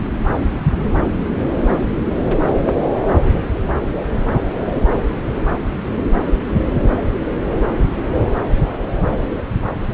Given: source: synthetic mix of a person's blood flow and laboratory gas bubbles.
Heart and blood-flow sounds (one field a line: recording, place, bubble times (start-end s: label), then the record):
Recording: Doppler ultrasound of blood flow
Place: subclavian vein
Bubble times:
no bubbles
From the record:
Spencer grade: 0 (complete lack of bubble signals)